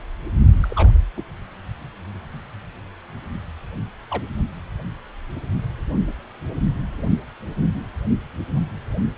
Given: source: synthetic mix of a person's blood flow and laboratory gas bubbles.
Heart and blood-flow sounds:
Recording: Doppler ultrasound of blood flow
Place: precordium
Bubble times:
0.63-0.98 s: bubbles
1.17-1.24 s: bubbles
4.11-4.23 s: bubbles
From the record:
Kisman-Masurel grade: 122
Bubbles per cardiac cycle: 1 to 2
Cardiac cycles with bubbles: 10 to 50%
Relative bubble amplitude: moderate (0.250 to 0.450)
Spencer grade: 2 (many but less than half of the cardiac periods contain bubble signals, singularly or in groups)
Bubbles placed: only in the low amplitude regions of the cardiac cycle

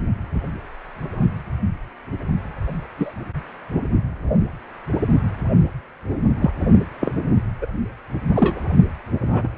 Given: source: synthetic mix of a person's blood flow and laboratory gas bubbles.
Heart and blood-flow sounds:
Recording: Doppler ultrasound of blood flow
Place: precordium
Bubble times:
2.97-3.14 s: bubbles
6.41-6.50 s: bubbles
7.00-7.14 s: bubbles
7.61-7.67 s: bubbles
8.36-8.61 s: bubbles
9.21-9.49 s: bubbles
From the record:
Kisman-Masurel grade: 122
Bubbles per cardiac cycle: 1 to 2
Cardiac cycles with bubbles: 10 to 50%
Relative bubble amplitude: moderate (0.250 to 0.450)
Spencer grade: 2 (many but less than half of the cardiac periods contain bubble signals, singularly or in groups)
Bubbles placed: only in the low amplitude regions of the cardiac cycle

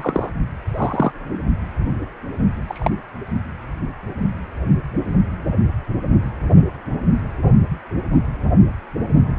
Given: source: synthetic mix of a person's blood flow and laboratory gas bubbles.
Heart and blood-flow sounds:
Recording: Doppler ultrasound of blood flow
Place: precordium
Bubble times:
0.00-0.30 s: bubbles
0.77-1.12 s: bubbles
2.68-2.90 s: bubbles
From the record:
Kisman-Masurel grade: 122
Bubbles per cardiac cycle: 1 to 2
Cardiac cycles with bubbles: 10 to 50%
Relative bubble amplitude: moderate (0.250 to 0.450)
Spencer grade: 2 (many but less than half of the cardiac periods contain bubble signals, singularly or in groups)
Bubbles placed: only in the low amplitude regions of the cardiac cycle

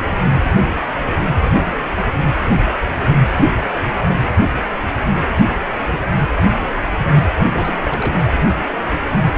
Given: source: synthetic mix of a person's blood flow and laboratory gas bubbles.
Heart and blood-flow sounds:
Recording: Doppler ultrasound of blood flow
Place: precordium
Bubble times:
7.35-7.79 s: bubbles
7.82-8.25 s: bubbles
From the record:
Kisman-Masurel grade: 211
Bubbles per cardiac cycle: several, 3 to 8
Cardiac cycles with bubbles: 1 to 10%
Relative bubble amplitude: barely perceptible (0.100 to 0.250)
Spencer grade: 1 (occasional bubble signal discernible with the cardiac motion signal, with majority of cardiac periods free of bubbles)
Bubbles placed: anywhere in the cardiac cycle

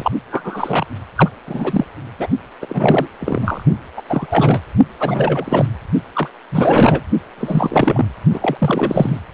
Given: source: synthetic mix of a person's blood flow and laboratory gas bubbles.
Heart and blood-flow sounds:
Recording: Doppler ultrasound of blood flow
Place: precordium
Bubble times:
0.00-0.11 s: bubbles
0.30-0.86 s: bubbles
1.16-1.29 s: bubbles
1.46-1.84 s: bubbles
2.18-2.28 s: bubbles
2.62-3.08 s: bubbles
3.20-3.63 s: bubbles
3.96-4.02 s: bubbles
4.09-4.26 s: bubbles
4.30-4.61 s: bubbles
5.00-5.66 s: bubbles
6.13-6.28 s: bubbles
6.51-7.01 s: bubbles
7.38-8.05 s: bubbles
8.33-9.20 s: bubbles
From the record:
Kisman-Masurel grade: 343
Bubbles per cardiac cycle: rolling drumbeat, 9 or more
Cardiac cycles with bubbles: 100%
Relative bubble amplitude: loud (0.450 to 0.775)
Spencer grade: 3 (all of the cardiac periods contain showers or single bubble signals, but not dominating or overriding the cardiac motion signals)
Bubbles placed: only in the low amplitude regions of the cardiac cycle

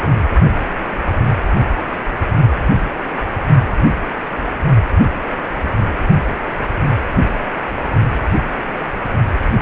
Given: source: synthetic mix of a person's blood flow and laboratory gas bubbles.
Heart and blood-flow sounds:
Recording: Doppler ultrasound of blood flow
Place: precordium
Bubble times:
0.00-0.18 s: bubbles
From the record:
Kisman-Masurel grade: 221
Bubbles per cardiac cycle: several, 3 to 8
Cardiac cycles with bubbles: 10 to 50%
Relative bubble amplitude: barely perceptible (0.100 to 0.250)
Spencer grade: 2 (many but less than half of the cardiac periods contain bubble signals, singularly or in groups)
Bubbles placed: only in the low amplitude regions of the cardiac cycle

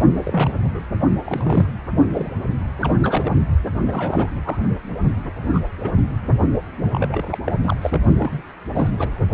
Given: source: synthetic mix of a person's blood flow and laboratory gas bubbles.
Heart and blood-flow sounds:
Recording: Doppler ultrasound of blood flow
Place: precordium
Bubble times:
0.16-0.59 s: bubbles
0.64-0.81 s: bubbles
1.24-1.66 s: bubbles
2.10-2.32 s: bubbles
2.80-2.92 s: bubbles
3.02-3.35 s: bubbles
3.88-4.62 s: bubbles
5.23-5.32 s: bubbles
5.53-5.60 s: bubbles
5.83-5.92 s: bubbles
6.92-7.38 s: bubbles
7.45-7.52 s: bubbles
7.63-7.77 s: bubbles
7.81-8.00 s: bubbles
8.19-8.42 s: bubbles
8.70-8.90 s: bubbles
8.97-9.20 s: bubbles
From the record:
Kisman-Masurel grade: 242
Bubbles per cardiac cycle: several, 3 to 8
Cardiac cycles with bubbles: 100%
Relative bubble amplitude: moderate (0.250 to 0.450)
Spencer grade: 3 (all of the cardiac periods contain showers or single bubble signals, but not dominating or overriding the cardiac motion signals)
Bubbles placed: only in the low amplitude regions of the cardiac cycle

